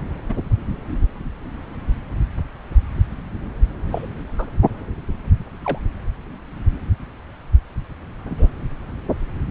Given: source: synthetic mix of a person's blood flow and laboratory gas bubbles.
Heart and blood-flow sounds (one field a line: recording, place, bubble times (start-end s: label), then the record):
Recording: Doppler ultrasound of blood flow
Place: subclavian vein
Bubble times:
0.29-0.34 s: bubbles
3.91-4.07 s: bubbles
4.38-4.46 s: bubbles
5.65-5.79 s: bubbles
8.29-8.49 s: bubbles
From the record:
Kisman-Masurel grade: 122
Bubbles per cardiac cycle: 1 to 2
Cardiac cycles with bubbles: 10 to 50%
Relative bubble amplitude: moderate (0.250 to 0.450)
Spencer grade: 2 (many but less than half of the cardiac periods contain bubble signals, singularly or in groups)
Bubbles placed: anywhere in the cardiac cycle